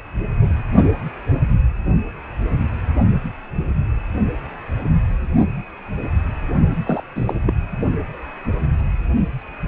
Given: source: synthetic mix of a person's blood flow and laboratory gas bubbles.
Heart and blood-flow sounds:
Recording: Doppler ultrasound of blood flow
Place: precordium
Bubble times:
6.70-6.76 s: bubbles
6.86-7.04 s: bubbles
7.15-7.35 s: bubbles
7.46-7.54 s: bubbles
From the record:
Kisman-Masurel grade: 212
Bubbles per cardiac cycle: several, 3 to 8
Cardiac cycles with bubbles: 1 to 10%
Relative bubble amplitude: moderate (0.250 to 0.450)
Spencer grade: 1 (occasional bubble signal discernible with the cardiac motion signal, with majority of cardiac periods free of bubbles)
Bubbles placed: only in the low amplitude regions of the cardiac cycle

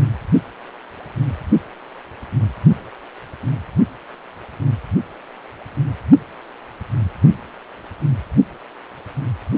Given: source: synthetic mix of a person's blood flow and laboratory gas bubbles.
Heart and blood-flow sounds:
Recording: Doppler ultrasound of blood flow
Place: precordium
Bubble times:
no bubbles
From the record:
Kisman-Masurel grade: 000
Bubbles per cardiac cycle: 0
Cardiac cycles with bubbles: 0%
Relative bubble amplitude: no bubbles discernible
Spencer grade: 0 (complete lack of bubble signals)

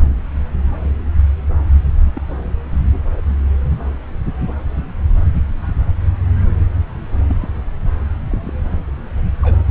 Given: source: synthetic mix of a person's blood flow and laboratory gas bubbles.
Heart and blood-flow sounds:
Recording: Doppler ultrasound of blood flow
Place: subclavian vein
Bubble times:
2.15-2.21 s: bubbles
3.17-3.21 s: bubbles
7.28-7.35 s: bubbles
7.40-7.49 s: bubbles
8.28-8.53 s: bubbles
9.42-9.64 s: bubbles
From the record:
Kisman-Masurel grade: 121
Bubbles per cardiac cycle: 1 to 2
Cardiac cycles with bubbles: 10 to 50%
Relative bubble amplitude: barely perceptible (0.100 to 0.250)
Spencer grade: 2 (many but less than half of the cardiac periods contain bubble signals, singularly or in groups)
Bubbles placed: anywhere in the cardiac cycle

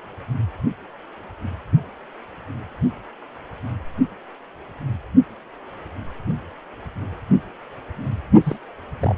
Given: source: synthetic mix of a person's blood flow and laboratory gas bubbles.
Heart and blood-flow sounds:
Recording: Doppler ultrasound of blood flow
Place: precordium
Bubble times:
8.43-8.57 s: bubbles
9.00-9.15 s: bubbles
From the record:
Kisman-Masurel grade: 211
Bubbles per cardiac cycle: several, 3 to 8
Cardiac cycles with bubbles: 1 to 10%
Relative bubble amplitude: barely perceptible (0.100 to 0.250)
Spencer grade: 1 (occasional bubble signal discernible with the cardiac motion signal, with majority of cardiac periods free of bubbles)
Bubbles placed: only in the low amplitude regions of the cardiac cycle

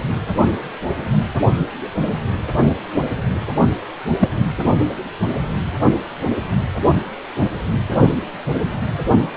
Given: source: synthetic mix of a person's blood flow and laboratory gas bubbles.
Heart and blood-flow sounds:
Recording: Doppler ultrasound of blood flow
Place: precordium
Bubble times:
4.19-4.29 s: bubbles
From the record:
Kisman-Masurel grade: 113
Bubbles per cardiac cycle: 1 to 2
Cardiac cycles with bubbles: 1 to 10%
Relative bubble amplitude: loud (0.450 to 0.775)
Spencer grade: 1 (occasional bubble signal discernible with the cardiac motion signal, with majority of cardiac periods free of bubbles)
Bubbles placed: anywhere in the cardiac cycle

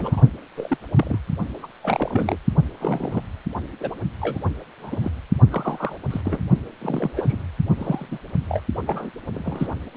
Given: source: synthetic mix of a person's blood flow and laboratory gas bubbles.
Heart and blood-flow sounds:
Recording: Doppler ultrasound of blood flow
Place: precordium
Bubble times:
0.00-0.21 s: bubbles
0.57-0.78 s: bubbles
0.95-1.19 s: bubbles
1.62-1.67 s: bubbles
1.82-2.37 s: bubbles
2.79-3.22 s: bubbles
3.81-3.96 s: bubbles
4.20-4.39 s: bubbles
4.80-5.11 s: bubbles
5.50-5.96 s: bubbles
6.10-6.21 s: bubbles
6.25-6.41 s: bubbles
6.82-7.42 s: bubbles
7.78-8.05 s: bubbles
8.11-8.18 s: bubbles
8.49-8.61 s: bubbles
8.87-9.10 s: bubbles
9.34-9.76 s: bubbles
From the record:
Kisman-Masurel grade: 242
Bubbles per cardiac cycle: several, 3 to 8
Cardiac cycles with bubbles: 100%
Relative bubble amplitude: moderate (0.250 to 0.450)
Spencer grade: 3 (all of the cardiac periods contain showers or single bubble signals, but not dominating or overriding the cardiac motion signals)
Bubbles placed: only in the low amplitude regions of the cardiac cycle

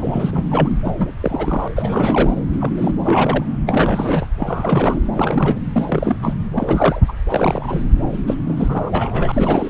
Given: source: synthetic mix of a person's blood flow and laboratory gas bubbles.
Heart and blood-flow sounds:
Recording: Doppler ultrasound of blood flow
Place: subclavian vein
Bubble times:
0.00-0.69 s: bubbles
0.84-1.11 s: bubbles
1.21-1.68 s: bubbles
1.75-2.34 s: bubbles
2.61-2.72 s: bubbles
2.77-2.96 s: bubbles
3.05-3.45 s: bubbles
3.66-4.27 s: bubbles
4.38-4.99 s: bubbles
5.16-5.58 s: bubbles
5.73-6.17 s: bubbles
6.21-6.33 s: bubbles
6.54-7.00 s: bubbles
7.08-7.12 s: bubbles
7.29-7.86 s: bubbles
8.27-8.35 s: bubbles
8.46-9.70 s: bubbles
From the record:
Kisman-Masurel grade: 332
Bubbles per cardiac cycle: rolling drumbeat, 9 or more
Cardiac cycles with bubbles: 50 to 99%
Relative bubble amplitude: moderate (0.250 to 0.450)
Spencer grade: 3 (all of the cardiac periods contain showers or single bubble signals, but not dominating or overriding the cardiac motion signals)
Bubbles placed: anywhere in the cardiac cycle

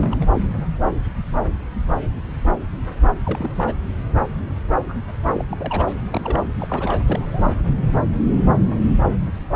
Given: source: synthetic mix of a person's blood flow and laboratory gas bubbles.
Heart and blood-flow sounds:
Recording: Doppler ultrasound of blood flow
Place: subclavian vein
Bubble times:
0.00-0.27 s: bubbles
3.25-3.51 s: bubbles
3.55-3.73 s: bubbles
4.88-4.94 s: bubbles
5.34-5.42 s: bubbles
5.51-5.57 s: bubbles
5.59-5.94 s: bubbles
6.04-6.39 s: bubbles
6.59-7.02 s: bubbles
7.06-7.54 s: bubbles
From the record:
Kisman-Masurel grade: 221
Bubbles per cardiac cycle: several, 3 to 8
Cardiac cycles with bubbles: 10 to 50%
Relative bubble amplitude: barely perceptible (0.100 to 0.250)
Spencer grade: 2 (many but less than half of the cardiac periods contain bubble signals, singularly or in groups)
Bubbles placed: anywhere in the cardiac cycle

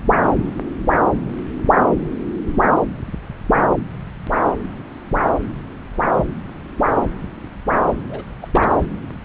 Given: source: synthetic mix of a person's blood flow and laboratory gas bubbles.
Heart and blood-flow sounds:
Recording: Doppler ultrasound of blood flow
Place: subclavian vein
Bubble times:
8.08-8.23 s: bubbles
8.41-8.48 s: bubbles
8.53-8.78 s: bubbles
From the record:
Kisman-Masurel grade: 211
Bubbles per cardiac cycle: several, 3 to 8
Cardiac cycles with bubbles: 1 to 10%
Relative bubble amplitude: barely perceptible (0.100 to 0.250)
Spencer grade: 1 (occasional bubble signal discernible with the cardiac motion signal, with majority of cardiac periods free of bubbles)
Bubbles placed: anywhere in the cardiac cycle

